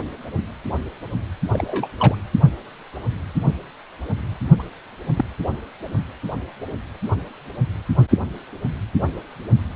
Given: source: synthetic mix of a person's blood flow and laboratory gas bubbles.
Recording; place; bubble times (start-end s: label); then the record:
Doppler ultrasound of blood flow; precordium
1.53-1.87 s: bubbles
1.97-2.15 s: bubbles
4.59-4.63 s: bubbles
5.16-5.25 s: bubbles
From the record:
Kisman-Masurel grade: 122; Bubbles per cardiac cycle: 1 to 2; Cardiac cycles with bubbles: 10 to 50%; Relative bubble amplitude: moderate (0.250 to 0.450); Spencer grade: 2 (many but less than half of the cardiac periods contain bubble signals, singularly or in groups); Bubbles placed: only in the low amplitude regions of the cardiac cycle